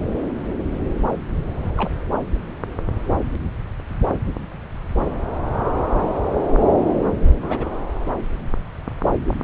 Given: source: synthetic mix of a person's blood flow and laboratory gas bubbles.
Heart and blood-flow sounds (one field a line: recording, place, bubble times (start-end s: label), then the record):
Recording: Doppler ultrasound of blood flow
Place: subclavian vein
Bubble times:
1.77-1.90 s: bubbles
6.00-6.16 s: bubbles
7.42-7.79 s: bubbles
From the record:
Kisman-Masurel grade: 121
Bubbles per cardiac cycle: 1 to 2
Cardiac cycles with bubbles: 10 to 50%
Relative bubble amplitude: barely perceptible (0.100 to 0.250)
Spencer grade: 2 (many but less than half of the cardiac periods contain bubble signals, singularly or in groups)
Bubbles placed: anywhere in the cardiac cycle